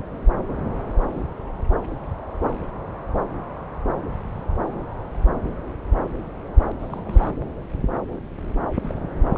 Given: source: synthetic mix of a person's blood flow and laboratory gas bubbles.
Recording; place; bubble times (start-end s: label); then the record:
Doppler ultrasound of blood flow; subclavian vein
6.79-7.34 s: bubbles
8.82-8.99 s: bubbles
9.33-9.38 s: bubbles
From the record:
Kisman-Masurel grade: 221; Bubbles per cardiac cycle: several, 3 to 8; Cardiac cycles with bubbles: 10 to 50%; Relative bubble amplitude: barely perceptible (0.100 to 0.250); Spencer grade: 2 (many but less than half of the cardiac periods contain bubble signals, singularly or in groups); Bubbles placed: anywhere in the cardiac cycle